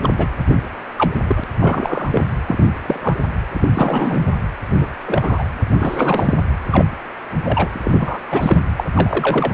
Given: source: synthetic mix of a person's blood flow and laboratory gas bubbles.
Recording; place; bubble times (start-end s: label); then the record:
Doppler ultrasound of blood flow; precordium
0.03-0.09 s: bubbles
0.17-0.28 s: bubbles
0.47-0.56 s: bubbles
0.98-1.11 s: bubbles
1.28-1.44 s: bubbles
1.59-2.24 s: bubbles
2.46-2.64 s: bubbles
2.79-3.22 s: bubbles
3.53-3.69 s: bubbles
3.75-4.32 s: bubbles
4.71-4.78 s: bubbles
4.80-4.88 s: bubbles
5.07-5.43 s: bubbles
5.79-6.43 s: bubbles
6.71-6.87 s: bubbles
7.45-7.67 s: bubbles
7.74-7.79 s: bubbles
7.83-8.20 s: bubbles
8.29-8.65 s: bubbles
8.77-8.85 s: bubbles
8.95-9.53 s: bubbles
From the record:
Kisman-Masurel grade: 243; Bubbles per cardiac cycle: several, 3 to 8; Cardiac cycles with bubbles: 100%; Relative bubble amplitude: loud (0.450 to 0.775); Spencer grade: 3 (all of the cardiac periods contain showers or single bubble signals, but not dominating or overriding the cardiac motion signals); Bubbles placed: anywhere in the cardiac cycle